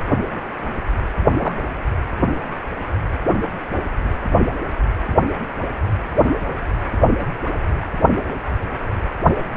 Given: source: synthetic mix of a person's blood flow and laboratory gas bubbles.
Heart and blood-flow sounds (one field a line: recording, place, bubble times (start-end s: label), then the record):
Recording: Doppler ultrasound of blood flow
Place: precordium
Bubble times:
1.40-1.53 s: bubbles
From the record:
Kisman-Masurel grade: 112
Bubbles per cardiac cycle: 1 to 2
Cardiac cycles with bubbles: 1 to 10%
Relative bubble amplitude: moderate (0.250 to 0.450)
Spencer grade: 1 (occasional bubble signal discernible with the cardiac motion signal, with majority of cardiac periods free of bubbles)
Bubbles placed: anywhere in the cardiac cycle